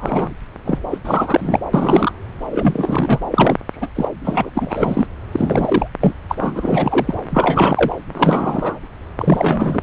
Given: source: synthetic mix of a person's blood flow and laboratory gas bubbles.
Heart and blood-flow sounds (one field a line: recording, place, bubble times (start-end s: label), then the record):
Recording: Doppler ultrasound of blood flow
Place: subclavian vein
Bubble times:
0.00-0.32 s: bubbles
0.65-0.78 s: bubbles
0.91-0.98 s: bubbles
1.05-1.59 s: bubbles
1.73-2.12 s: bubbles
2.51-3.19 s: bubbles
3.31-3.56 s: bubbles
3.73-3.90 s: bubbles
3.95-4.08 s: bubbles
4.24-4.50 s: bubbles
4.55-5.05 s: bubbles
5.32-5.88 s: bubbles
6.00-6.13 s: bubbles
6.29-6.36 s: bubbles
6.38-7.14 s: bubbles
7.29-7.96 s: bubbles
8.14-8.79 s: bubbles
9.17-9.82 s: bubbles
From the record:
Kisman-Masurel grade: 343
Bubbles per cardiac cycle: rolling drumbeat, 9 or more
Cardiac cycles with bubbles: 100%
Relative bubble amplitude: loud (0.450 to 0.775)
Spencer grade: 3 (all of the cardiac periods contain showers or single bubble signals, but not dominating or overriding the cardiac motion signals)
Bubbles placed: anywhere in the cardiac cycle